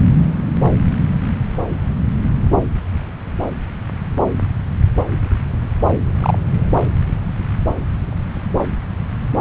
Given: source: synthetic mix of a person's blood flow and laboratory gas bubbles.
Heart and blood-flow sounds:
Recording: Doppler ultrasound of blood flow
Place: subclavian vein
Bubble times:
6.20-6.38 s: bubbles
From the record:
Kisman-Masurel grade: 113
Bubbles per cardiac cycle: 1 to 2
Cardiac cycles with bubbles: 1 to 10%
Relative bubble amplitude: loud (0.450 to 0.775)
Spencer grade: 1 (occasional bubble signal discernible with the cardiac motion signal, with majority of cardiac periods free of bubbles)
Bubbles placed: anywhere in the cardiac cycle

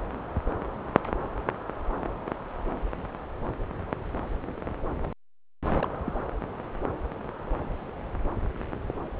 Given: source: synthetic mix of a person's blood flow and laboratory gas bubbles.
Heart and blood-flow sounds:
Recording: Doppler ultrasound of blood flow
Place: subclavian vein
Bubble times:
5.79-5.87 s: bubbles
6.06-6.12 s: bubbles
From the record:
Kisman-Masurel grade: 111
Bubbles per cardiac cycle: 1 to 2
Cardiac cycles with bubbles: 1 to 10%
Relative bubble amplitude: barely perceptible (0.100 to 0.250)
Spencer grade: 1 (occasional bubble signal discernible with the cardiac motion signal, with majority of cardiac periods free of bubbles)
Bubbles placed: anywhere in the cardiac cycle

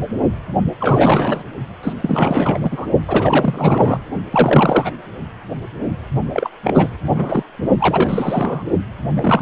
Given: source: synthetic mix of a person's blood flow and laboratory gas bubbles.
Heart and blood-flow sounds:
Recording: Doppler ultrasound of blood flow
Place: precordium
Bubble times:
0.79-1.43 s: bubbles
1.83-1.93 s: bubbles
2.02-2.59 s: bubbles
2.63-2.87 s: bubbles
3.08-4.00 s: bubbles
4.32-4.91 s: bubbles
6.33-6.49 s: bubbles
6.63-6.90 s: bubbles
7.10-7.43 s: bubbles
7.79-8.63 s: bubbles
9.15-9.42 s: bubbles
From the record:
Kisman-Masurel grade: 333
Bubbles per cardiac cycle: rolling drumbeat, 9 or more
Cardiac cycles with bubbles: 50 to 99%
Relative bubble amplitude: loud (0.450 to 0.775)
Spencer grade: 3 (all of the cardiac periods contain showers or single bubble signals, but not dominating or overriding the cardiac motion signals)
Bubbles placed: only in the low amplitude regions of the cardiac cycle

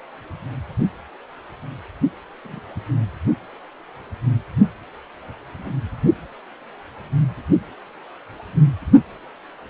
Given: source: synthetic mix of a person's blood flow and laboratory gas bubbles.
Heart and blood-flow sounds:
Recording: Doppler ultrasound of blood flow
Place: precordium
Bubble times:
2.44-2.60 s: bubbles
From the record:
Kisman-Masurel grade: 121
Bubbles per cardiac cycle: 1 to 2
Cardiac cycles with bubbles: 10 to 50%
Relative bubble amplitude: barely perceptible (0.100 to 0.250)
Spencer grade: 2 (many but less than half of the cardiac periods contain bubble signals, singularly or in groups)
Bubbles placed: only in the low amplitude regions of the cardiac cycle

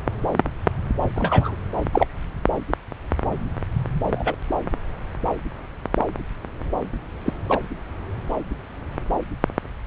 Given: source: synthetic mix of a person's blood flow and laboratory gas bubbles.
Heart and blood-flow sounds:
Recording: Doppler ultrasound of blood flow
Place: subclavian vein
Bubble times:
1.16-1.56 s: bubbles
1.93-2.06 s: bubbles
4.11-4.34 s: bubbles
7.25-7.33 s: bubbles
7.49-7.61 s: bubbles
From the record:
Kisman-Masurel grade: 122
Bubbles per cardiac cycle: 1 to 2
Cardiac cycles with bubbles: 10 to 50%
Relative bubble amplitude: moderate (0.250 to 0.450)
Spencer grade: 2 (many but less than half of the cardiac periods contain bubble signals, singularly or in groups)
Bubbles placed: anywhere in the cardiac cycle

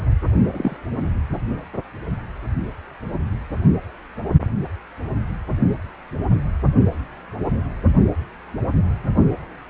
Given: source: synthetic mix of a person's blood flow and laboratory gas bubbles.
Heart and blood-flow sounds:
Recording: Doppler ultrasound of blood flow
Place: precordium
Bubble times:
0.51-0.77 s: bubbles
From the record:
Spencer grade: 2 (many but less than half of the cardiac periods contain bubble signals, singularly or in groups)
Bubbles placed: only in the low amplitude regions of the cardiac cycle

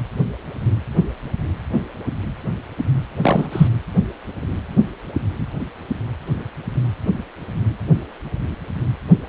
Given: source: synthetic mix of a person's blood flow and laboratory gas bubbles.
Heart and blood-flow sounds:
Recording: Doppler ultrasound of blood flow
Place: precordium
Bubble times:
3.22-3.48 s: bubbles
3.52-3.68 s: bubbles
From the record:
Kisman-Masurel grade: 213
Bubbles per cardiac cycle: several, 3 to 8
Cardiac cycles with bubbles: 1 to 10%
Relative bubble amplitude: loud (0.450 to 0.775)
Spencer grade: 1 (occasional bubble signal discernible with the cardiac motion signal, with majority of cardiac periods free of bubbles)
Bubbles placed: anywhere in the cardiac cycle

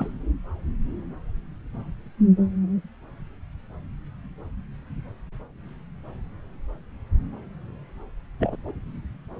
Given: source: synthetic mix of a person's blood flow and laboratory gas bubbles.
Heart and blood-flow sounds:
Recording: Doppler ultrasound of blood flow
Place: subclavian vein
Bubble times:
0.00-0.11 s: bubbles
8.40-8.56 s: bubbles
8.65-8.71 s: bubbles
From the record:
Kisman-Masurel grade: 222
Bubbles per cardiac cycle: several, 3 to 8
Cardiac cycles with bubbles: 10 to 50%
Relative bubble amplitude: moderate (0.250 to 0.450)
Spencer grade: 2 (many but less than half of the cardiac periods contain bubble signals, singularly or in groups)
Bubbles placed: anywhere in the cardiac cycle

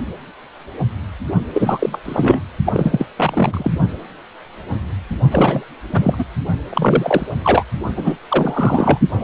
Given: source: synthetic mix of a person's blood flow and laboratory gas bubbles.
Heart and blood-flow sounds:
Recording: Doppler ultrasound of blood flow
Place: precordium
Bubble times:
1.53-1.99 s: bubbles
2.04-2.40 s: bubbles
2.66-3.06 s: bubbles
3.16-3.71 s: bubbles
5.32-5.65 s: bubbles
5.92-6.24 s: bubbles
6.69-7.37 s: bubbles
7.44-7.64 s: bubbles
7.96-8.17 s: bubbles
8.30-8.99 s: bubbles
9.20-9.24 s: bubbles
From the record:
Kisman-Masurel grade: 333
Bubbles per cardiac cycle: rolling drumbeat, 9 or more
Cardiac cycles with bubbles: 50 to 99%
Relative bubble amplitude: loud (0.450 to 0.775)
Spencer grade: 3 (all of the cardiac periods contain showers or single bubble signals, but not dominating or overriding the cardiac motion signals)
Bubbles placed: only in the low amplitude regions of the cardiac cycle

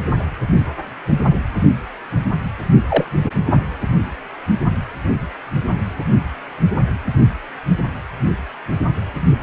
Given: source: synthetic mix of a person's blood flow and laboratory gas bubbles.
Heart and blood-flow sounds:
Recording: Doppler ultrasound of blood flow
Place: precordium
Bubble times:
2.89-3.06 s: bubbles
From the record:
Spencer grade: 1 (occasional bubble signal discernible with the cardiac motion signal, with majority of cardiac periods free of bubbles)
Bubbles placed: only in the low amplitude regions of the cardiac cycle

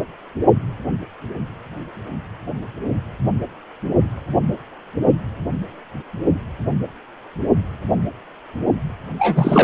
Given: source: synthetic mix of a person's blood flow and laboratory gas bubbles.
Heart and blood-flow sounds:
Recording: Doppler ultrasound of blood flow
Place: precordium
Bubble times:
9.19-9.64 s: bubbles
From the record:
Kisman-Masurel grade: 223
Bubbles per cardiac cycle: several, 3 to 8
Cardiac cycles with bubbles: 10 to 50%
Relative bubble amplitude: loud (0.450 to 0.775)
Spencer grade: 2 (many but less than half of the cardiac periods contain bubble signals, singularly or in groups)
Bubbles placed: only in the low amplitude regions of the cardiac cycle

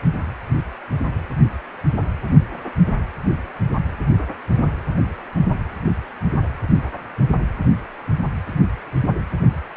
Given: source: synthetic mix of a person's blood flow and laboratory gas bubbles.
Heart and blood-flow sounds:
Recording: Doppler ultrasound of blood flow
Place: precordium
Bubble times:
no bubbles
From the record:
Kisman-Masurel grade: 000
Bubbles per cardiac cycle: 0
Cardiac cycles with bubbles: 0%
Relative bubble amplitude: no bubbles discernible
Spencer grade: 0 (complete lack of bubble signals)

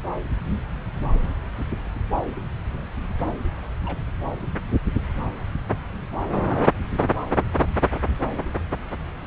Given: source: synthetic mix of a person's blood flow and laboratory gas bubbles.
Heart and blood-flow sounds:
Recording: Doppler ultrasound of blood flow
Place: subclavian vein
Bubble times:
1.84-2.05 s: bubbles
3.85-3.99 s: bubbles
From the record:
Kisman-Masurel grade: 121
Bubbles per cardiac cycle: 1 to 2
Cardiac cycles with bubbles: 10 to 50%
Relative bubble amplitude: barely perceptible (0.100 to 0.250)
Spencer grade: 2 (many but less than half of the cardiac periods contain bubble signals, singularly or in groups)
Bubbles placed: anywhere in the cardiac cycle

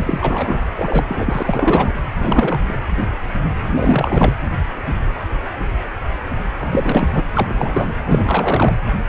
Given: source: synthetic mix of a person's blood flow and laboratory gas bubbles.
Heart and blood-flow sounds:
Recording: Doppler ultrasound of blood flow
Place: precordium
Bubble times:
0.00-0.64 s: bubbles
0.75-1.05 s: bubbles
1.08-1.43 s: bubbles
1.46-1.95 s: bubbles
2.19-2.75 s: bubbles
3.66-4.32 s: bubbles
6.60-7.07 s: bubbles
7.14-7.23 s: bubbles
7.34-7.92 s: bubbles
8.05-8.76 s: bubbles
From the record:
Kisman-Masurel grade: 333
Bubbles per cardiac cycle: rolling drumbeat, 9 or more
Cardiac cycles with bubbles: 50 to 99%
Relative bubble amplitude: loud (0.450 to 0.775)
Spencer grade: 3 (all of the cardiac periods contain showers or single bubble signals, but not dominating or overriding the cardiac motion signals)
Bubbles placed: anywhere in the cardiac cycle

